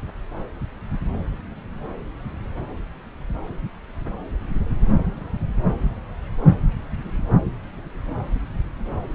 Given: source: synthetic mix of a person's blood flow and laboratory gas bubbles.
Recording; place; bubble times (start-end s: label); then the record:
Doppler ultrasound of blood flow; subclavian vein
7.00-7.17 s: bubbles
From the record:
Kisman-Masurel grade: 111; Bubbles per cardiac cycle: 1 to 2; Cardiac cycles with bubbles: 1 to 10%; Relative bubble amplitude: barely perceptible (0.100 to 0.250); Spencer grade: 1 (occasional bubble signal discernible with the cardiac motion signal, with majority of cardiac periods free of bubbles); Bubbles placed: anywhere in the cardiac cycle